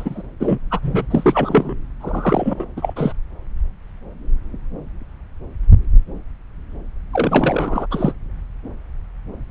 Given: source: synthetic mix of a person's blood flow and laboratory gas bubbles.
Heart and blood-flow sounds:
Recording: Doppler ultrasound of blood flow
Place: subclavian vein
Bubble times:
0.00-0.22 s: bubbles
0.40-0.58 s: bubbles
0.70-0.80 s: bubbles
0.82-1.06 s: bubbles
1.10-1.75 s: bubbles
2.01-2.66 s: bubbles
2.77-3.13 s: bubbles
7.13-7.86 s: bubbles
7.91-8.13 s: bubbles
From the record:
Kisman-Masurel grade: 333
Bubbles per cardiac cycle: rolling drumbeat, 9 or more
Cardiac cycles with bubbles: 50 to 99%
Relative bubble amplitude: loud (0.450 to 0.775)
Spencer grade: 3 (all of the cardiac periods contain showers or single bubble signals, but not dominating or overriding the cardiac motion signals)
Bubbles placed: anywhere in the cardiac cycle

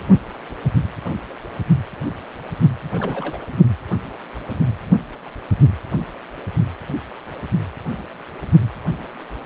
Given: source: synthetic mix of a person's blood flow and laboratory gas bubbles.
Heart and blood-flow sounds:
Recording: Doppler ultrasound of blood flow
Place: precordium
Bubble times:
2.82-3.44 s: bubbles
From the record:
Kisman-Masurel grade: 211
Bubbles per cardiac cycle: several, 3 to 8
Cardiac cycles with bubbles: 1 to 10%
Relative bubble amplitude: barely perceptible (0.100 to 0.250)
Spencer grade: 1 (occasional bubble signal discernible with the cardiac motion signal, with majority of cardiac periods free of bubbles)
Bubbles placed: anywhere in the cardiac cycle

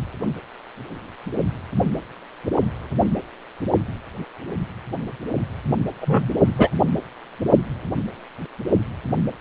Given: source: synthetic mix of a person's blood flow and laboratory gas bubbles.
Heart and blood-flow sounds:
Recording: Doppler ultrasound of blood flow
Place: precordium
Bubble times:
6.01-6.29 s: bubbles
6.58-6.69 s: bubbles
From the record:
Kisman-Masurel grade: 113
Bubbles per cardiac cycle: 1 to 2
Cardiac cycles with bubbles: 1 to 10%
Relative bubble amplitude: loud (0.450 to 0.775)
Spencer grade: 1 (occasional bubble signal discernible with the cardiac motion signal, with majority of cardiac periods free of bubbles)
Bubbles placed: only in the low amplitude regions of the cardiac cycle

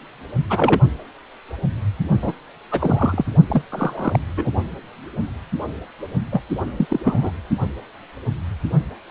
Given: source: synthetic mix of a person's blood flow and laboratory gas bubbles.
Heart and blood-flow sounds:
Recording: Doppler ultrasound of blood flow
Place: precordium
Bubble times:
0.49-0.81 s: bubbles
2.22-2.32 s: bubbles
2.71-3.25 s: bubbles
3.49-3.62 s: bubbles
3.72-4.19 s: bubbles
4.36-4.50 s: bubbles
6.31-6.42 s: bubbles
6.77-6.87 s: bubbles
6.89-7.00 s: bubbles
7.04-7.32 s: bubbles
From the record:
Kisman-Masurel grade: 232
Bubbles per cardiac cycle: several, 3 to 8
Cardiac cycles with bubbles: 50 to 99%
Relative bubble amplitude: moderate (0.250 to 0.450)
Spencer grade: 3 (all of the cardiac periods contain showers or single bubble signals, but not dominating or overriding the cardiac motion signals)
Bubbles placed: only in the low amplitude regions of the cardiac cycle

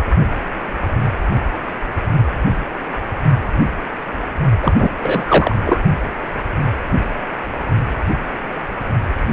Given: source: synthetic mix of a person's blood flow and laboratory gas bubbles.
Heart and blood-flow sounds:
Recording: Doppler ultrasound of blood flow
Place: precordium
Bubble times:
4.62-4.72 s: bubbles
4.76-4.89 s: bubbles
5.00-5.55 s: bubbles
5.65-5.82 s: bubbles
From the record:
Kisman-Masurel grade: 213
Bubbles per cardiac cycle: several, 3 to 8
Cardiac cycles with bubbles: 1 to 10%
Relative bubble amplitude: loud (0.450 to 0.775)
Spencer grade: 1 (occasional bubble signal discernible with the cardiac motion signal, with majority of cardiac periods free of bubbles)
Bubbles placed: only in the low amplitude regions of the cardiac cycle

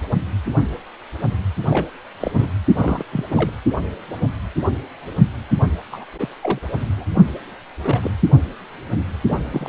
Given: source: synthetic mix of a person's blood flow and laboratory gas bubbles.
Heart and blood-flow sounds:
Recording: Doppler ultrasound of blood flow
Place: precordium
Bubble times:
1.69-1.89 s: bubbles
2.20-2.50 s: bubbles
2.74-3.04 s: bubbles
3.12-3.24 s: bubbles
3.30-3.50 s: bubbles
5.92-6.04 s: bubbles
6.20-6.29 s: bubbles
6.41-6.59 s: bubbles
6.96-7.04 s: bubbles
7.15-7.22 s: bubbles
7.83-8.11 s: bubbles
9.29-9.45 s: bubbles
9.52-9.69 s: bubbles
From the record:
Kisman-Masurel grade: 222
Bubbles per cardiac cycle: several, 3 to 8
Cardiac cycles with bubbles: 10 to 50%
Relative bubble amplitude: moderate (0.250 to 0.450)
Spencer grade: 2 (many but less than half of the cardiac periods contain bubble signals, singularly or in groups)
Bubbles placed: anywhere in the cardiac cycle

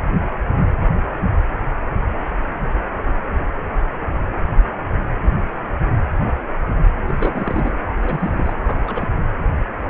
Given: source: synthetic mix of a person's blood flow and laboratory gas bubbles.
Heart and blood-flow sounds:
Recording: Doppler ultrasound of blood flow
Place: precordium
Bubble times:
7.06-7.73 s: bubbles
7.97-8.54 s: bubbles
8.62-8.78 s: bubbles
8.86-9.10 s: bubbles
From the record:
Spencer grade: 2 (many but less than half of the cardiac periods contain bubble signals, singularly or in groups)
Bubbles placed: anywhere in the cardiac cycle

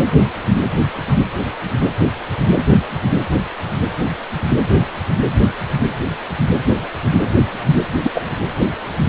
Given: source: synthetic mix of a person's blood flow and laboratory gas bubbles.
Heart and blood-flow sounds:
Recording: Doppler ultrasound of blood flow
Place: precordium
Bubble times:
8.04-8.11 s: bubbles
8.14-8.22 s: bubbles
From the record:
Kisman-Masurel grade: 122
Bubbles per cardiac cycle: 1 to 2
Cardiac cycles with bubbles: 10 to 50%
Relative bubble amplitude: moderate (0.250 to 0.450)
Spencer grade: 2 (many but less than half of the cardiac periods contain bubble signals, singularly or in groups)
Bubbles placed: anywhere in the cardiac cycle

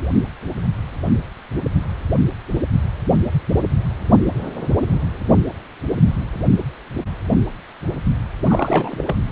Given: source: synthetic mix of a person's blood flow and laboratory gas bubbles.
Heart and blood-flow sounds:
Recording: Doppler ultrasound of blood flow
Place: precordium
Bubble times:
8.47-9.16 s: bubbles
From the record:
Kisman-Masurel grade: 212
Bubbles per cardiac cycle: several, 3 to 8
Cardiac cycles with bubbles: 1 to 10%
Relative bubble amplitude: moderate (0.250 to 0.450)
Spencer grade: 1 (occasional bubble signal discernible with the cardiac motion signal, with majority of cardiac periods free of bubbles)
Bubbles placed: anywhere in the cardiac cycle

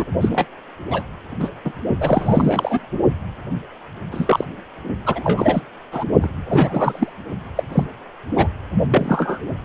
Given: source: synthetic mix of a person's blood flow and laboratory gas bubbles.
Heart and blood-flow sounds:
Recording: Doppler ultrasound of blood flow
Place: precordium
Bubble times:
0.00-0.04 s: bubbles
0.21-0.45 s: bubbles
0.91-1.03 s: bubbles
1.40-1.49 s: bubbles
1.65-1.73 s: bubbles
1.99-2.88 s: bubbles
4.11-4.44 s: bubbles
5.06-5.62 s: bubbles
5.92-6.04 s: bubbles
6.21-6.29 s: bubbles
6.46-7.12 s: bubbles
7.55-7.63 s: bubbles
7.72-7.83 s: bubbles
8.36-8.47 s: bubbles
8.90-9.46 s: bubbles
From the record:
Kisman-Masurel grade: 243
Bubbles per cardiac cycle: several, 3 to 8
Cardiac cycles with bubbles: 100%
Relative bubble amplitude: loud (0.450 to 0.775)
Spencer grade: 3 (all of the cardiac periods contain showers or single bubble signals, but not dominating or overriding the cardiac motion signals)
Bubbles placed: only in the low amplitude regions of the cardiac cycle

